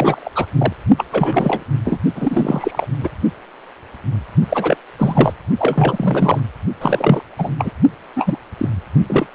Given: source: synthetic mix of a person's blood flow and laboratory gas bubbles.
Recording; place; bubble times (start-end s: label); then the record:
Doppler ultrasound of blood flow; precordium
0.00-0.29 s: bubbles
0.35-0.46 s: bubbles
0.59-0.72 s: bubbles
0.97-1.04 s: bubbles
1.12-1.64 s: bubbles
1.84-2.00 s: bubbles
2.15-2.87 s: bubbles
3.02-3.09 s: bubbles
4.49-4.77 s: bubbles
4.99-5.33 s: bubbles
5.58-6.42 s: bubbles
6.79-7.23 s: bubbles
7.38-7.54 s: bubbles
7.58-7.71 s: bubbles
8.16-8.38 s: bubbles
8.58-8.69 s: bubbles
9.08-9.27 s: bubbles
From the record:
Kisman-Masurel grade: 333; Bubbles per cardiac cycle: rolling drumbeat, 9 or more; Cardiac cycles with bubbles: 50 to 99%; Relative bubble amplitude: loud (0.450 to 0.775); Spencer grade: 3 (all of the cardiac periods contain showers or single bubble signals, but not dominating or overriding the cardiac motion signals); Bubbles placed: only in the low amplitude regions of the cardiac cycle